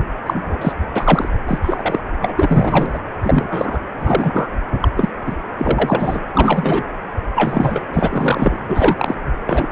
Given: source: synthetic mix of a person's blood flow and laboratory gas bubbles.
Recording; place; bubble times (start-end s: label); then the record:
Doppler ultrasound of blood flow; precordium
0.26-0.73 s: bubbles
0.94-1.29 s: bubbles
1.46-1.99 s: bubbles
2.19-2.34 s: bubbles
2.38-2.99 s: bubbles
3.23-3.79 s: bubbles
3.99-4.50 s: bubbles
4.81-4.88 s: bubbles
4.96-5.08 s: bubbles
5.26-5.35 s: bubbles
5.57-6.20 s: bubbles
6.33-6.83 s: bubbles
7.35-7.83 s: bubbles
7.94-8.58 s: bubbles
8.69-9.14 s: bubbles
9.46-9.66 s: bubbles
From the record:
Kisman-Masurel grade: 233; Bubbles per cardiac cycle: several, 3 to 8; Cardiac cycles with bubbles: 50 to 99%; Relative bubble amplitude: loud (0.450 to 0.775); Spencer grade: 3 (all of the cardiac periods contain showers or single bubble signals, but not dominating or overriding the cardiac motion signals); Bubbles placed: anywhere in the cardiac cycle